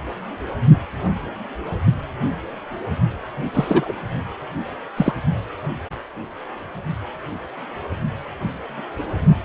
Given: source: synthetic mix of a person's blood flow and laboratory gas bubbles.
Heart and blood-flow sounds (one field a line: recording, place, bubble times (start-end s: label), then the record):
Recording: Doppler ultrasound of blood flow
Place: precordium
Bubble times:
3.54-3.92 s: bubbles
4.97-5.12 s: bubbles
From the record:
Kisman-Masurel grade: 213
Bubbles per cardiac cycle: several, 3 to 8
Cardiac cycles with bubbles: 1 to 10%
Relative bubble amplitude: loud (0.450 to 0.775)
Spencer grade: 1 (occasional bubble signal discernible with the cardiac motion signal, with majority of cardiac periods free of bubbles)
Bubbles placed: only in the low amplitude regions of the cardiac cycle